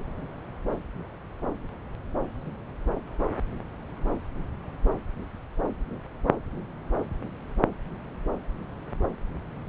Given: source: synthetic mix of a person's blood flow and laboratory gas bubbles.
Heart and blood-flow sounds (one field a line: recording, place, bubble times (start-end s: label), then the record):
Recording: Doppler ultrasound of blood flow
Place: subclavian vein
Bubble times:
no bubbles
From the record:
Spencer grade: 0 (complete lack of bubble signals)